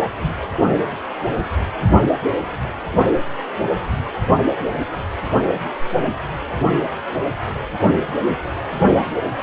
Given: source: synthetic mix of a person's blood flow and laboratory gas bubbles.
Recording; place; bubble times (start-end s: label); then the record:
Doppler ultrasound of blood flow; precordium
0.02-0.10 s: bubbles
0.22-0.33 s: bubbles
From the record:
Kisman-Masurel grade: 112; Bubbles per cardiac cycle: 1 to 2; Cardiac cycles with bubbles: 1 to 10%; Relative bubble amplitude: moderate (0.250 to 0.450); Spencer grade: 1 (occasional bubble signal discernible with the cardiac motion signal, with majority of cardiac periods free of bubbles); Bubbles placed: only in the low amplitude regions of the cardiac cycle